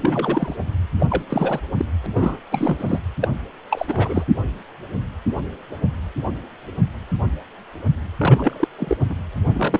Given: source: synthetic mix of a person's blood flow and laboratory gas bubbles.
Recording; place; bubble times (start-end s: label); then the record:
Doppler ultrasound of blood flow; precordium
0.01-0.54 s: bubbles
0.99-1.06 s: bubbles
1.09-1.23 s: bubbles
1.29-1.60 s: bubbles
1.77-1.85 s: bubbles
2.03-2.06 s: bubbles
2.14-2.38 s: bubbles
2.51-2.99 s: bubbles
3.21-3.29 s: bubbles
3.70-4.25 s: bubbles
8.18-8.68 s: bubbles
8.79-8.97 s: bubbles
9.00-9.04 s: bubbles
9.10-9.15 s: bubbles
9.53-9.80 s: bubbles
From the record:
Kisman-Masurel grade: 332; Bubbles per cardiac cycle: rolling drumbeat, 9 or more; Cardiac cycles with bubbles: 50 to 99%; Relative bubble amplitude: moderate (0.250 to 0.450); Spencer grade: 3 (all of the cardiac periods contain showers or single bubble signals, but not dominating or overriding the cardiac motion signals); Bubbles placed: anywhere in the cardiac cycle